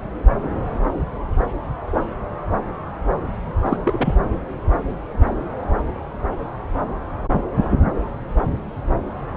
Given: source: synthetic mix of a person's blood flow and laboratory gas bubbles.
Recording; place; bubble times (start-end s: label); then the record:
Doppler ultrasound of blood flow; subclavian vein
3.65-3.77 s: bubbles
3.85-4.14 s: bubbles
From the record:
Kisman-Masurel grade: 212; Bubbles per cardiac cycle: several, 3 to 8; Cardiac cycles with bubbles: 1 to 10%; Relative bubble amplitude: moderate (0.250 to 0.450); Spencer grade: 1 (occasional bubble signal discernible with the cardiac motion signal, with majority of cardiac periods free of bubbles); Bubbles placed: anywhere in the cardiac cycle